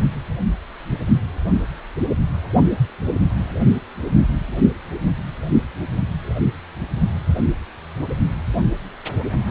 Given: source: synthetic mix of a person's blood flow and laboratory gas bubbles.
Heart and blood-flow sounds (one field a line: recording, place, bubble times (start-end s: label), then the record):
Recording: Doppler ultrasound of blood flow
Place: precordium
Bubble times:
no bubbles
From the record:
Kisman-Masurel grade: 000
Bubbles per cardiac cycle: 0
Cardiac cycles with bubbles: 0%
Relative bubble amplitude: no bubbles discernible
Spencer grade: 0 (complete lack of bubble signals)